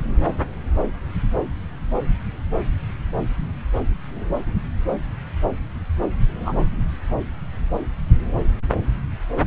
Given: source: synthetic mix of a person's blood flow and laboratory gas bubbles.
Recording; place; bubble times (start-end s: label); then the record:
Doppler ultrasound of blood flow; subclavian vein
6.45-6.71 s: bubbles
From the record:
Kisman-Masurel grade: 112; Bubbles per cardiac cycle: 1 to 2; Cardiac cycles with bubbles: 1 to 10%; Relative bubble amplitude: moderate (0.250 to 0.450); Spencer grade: 1 (occasional bubble signal discernible with the cardiac motion signal, with majority of cardiac periods free of bubbles); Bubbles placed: anywhere in the cardiac cycle